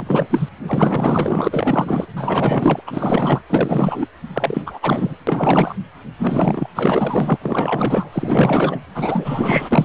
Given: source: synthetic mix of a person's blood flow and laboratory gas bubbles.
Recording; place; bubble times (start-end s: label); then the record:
Doppler ultrasound of blood flow; precordium
0.00-0.27 s: bubbles
0.29-0.49 s: bubbles
0.67-2.06 s: bubbles
2.16-2.82 s: bubbles
2.86-3.41 s: bubbles
3.50-4.08 s: bubbles
4.33-4.62 s: bubbles
4.66-4.79 s: bubbles
4.82-5.16 s: bubbles
5.27-5.75 s: bubbles
6.19-6.68 s: bubbles
6.75-7.38 s: bubbles
7.42-8.09 s: bubbles
8.12-8.80 s: bubbles
8.94-9.85 s: bubbles
From the record:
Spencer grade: 4 (maximum detectable bubble signal sounding continuously throughout systole and diastole of every cardiac period, and overriding the amplitude of the normal cardiac signals); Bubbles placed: anywhere in the cardiac cycle